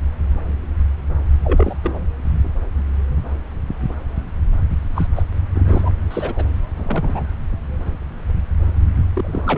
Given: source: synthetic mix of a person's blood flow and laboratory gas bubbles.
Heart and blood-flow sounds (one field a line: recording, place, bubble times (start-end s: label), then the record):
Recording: Doppler ultrasound of blood flow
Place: subclavian vein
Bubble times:
1.44-1.78 s: bubbles
1.83-2.00 s: bubbles
4.95-5.07 s: bubbles
5.16-5.22 s: bubbles
5.54-5.92 s: bubbles
6.11-6.44 s: bubbles
6.76-7.27 s: bubbles
9.15-9.58 s: bubbles
From the record:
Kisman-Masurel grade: 222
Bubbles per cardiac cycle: several, 3 to 8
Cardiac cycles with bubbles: 10 to 50%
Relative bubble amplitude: moderate (0.250 to 0.450)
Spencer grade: 2 (many but less than half of the cardiac periods contain bubble signals, singularly or in groups)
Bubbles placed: anywhere in the cardiac cycle